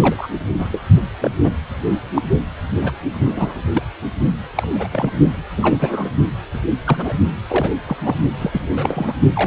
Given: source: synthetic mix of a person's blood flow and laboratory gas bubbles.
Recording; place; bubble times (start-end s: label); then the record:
Doppler ultrasound of blood flow; precordium
0.00-0.28 s: bubbles
0.58-0.81 s: bubbles
1.20-1.31 s: bubbles
1.44-1.51 s: bubbles
2.14-2.22 s: bubbles
2.82-2.92 s: bubbles
3.12-3.62 s: bubbles
3.73-3.83 s: bubbles
4.55-4.67 s: bubbles
4.75-4.88 s: bubbles
4.92-5.11 s: bubbles
5.56-6.11 s: bubbles
6.54-6.61 s: bubbles
6.84-7.13 s: bubbles
7.48-7.77 s: bubbles
7.87-7.97 s: bubbles
8.03-8.15 s: bubbles
8.39-8.69 s: bubbles
8.76-9.13 s: bubbles
9.33-9.47 s: bubbles
From the record:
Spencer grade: 3 (all of the cardiac periods contain showers or single bubble signals, but not dominating or overriding the cardiac motion signals); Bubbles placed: only in the low amplitude regions of the cardiac cycle